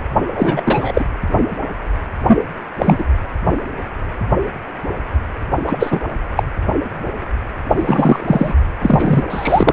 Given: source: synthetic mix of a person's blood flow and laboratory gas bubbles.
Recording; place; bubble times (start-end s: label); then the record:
Doppler ultrasound of blood flow; precordium
0.27-1.05 s: bubbles
2.26-2.42 s: bubbles
2.78-3.05 s: bubbles
5.64-6.00 s: bubbles
6.36-6.43 s: bubbles
7.69-8.54 s: bubbles
8.81-9.23 s: bubbles
9.30-9.72 s: bubbles
From the record:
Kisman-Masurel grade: 233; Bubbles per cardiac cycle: several, 3 to 8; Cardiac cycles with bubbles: 50 to 99%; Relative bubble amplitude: loud (0.450 to 0.775); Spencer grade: 3 (all of the cardiac periods contain showers or single bubble signals, but not dominating or overriding the cardiac motion signals); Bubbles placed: anywhere in the cardiac cycle